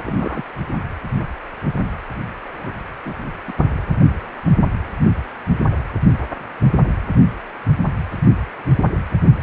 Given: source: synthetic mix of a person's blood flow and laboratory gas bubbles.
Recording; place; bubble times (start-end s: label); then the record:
Doppler ultrasound of blood flow; precordium
0.05-0.43 s: bubbles
3.05-3.14 s: bubbles
3.47-3.52 s: bubbles
From the record:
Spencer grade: 2 (many but less than half of the cardiac periods contain bubble signals, singularly or in groups); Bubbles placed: anywhere in the cardiac cycle